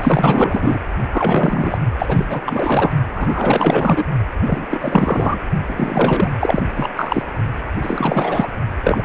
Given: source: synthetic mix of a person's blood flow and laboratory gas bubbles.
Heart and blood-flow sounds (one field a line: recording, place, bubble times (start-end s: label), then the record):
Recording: Doppler ultrasound of blood flow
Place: precordium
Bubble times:
0.00-0.79 s: bubbles
1.11-1.78 s: bubbles
1.99-2.25 s: bubbles
2.29-2.41 s: bubbles
2.46-2.92 s: bubbles
3.14-4.04 s: bubbles
4.40-4.67 s: bubbles
4.70-5.39 s: bubbles
5.68-6.34 s: bubbles
6.39-6.62 s: bubbles
6.75-6.89 s: bubbles
6.96-7.23 s: bubbles
7.82-8.51 s: bubbles
8.83-9.03 s: bubbles
From the record:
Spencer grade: 4 (maximum detectable bubble signal sounding continuously throughout systole and diastole of every cardiac period, and overriding the amplitude of the normal cardiac signals)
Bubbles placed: only in the low amplitude regions of the cardiac cycle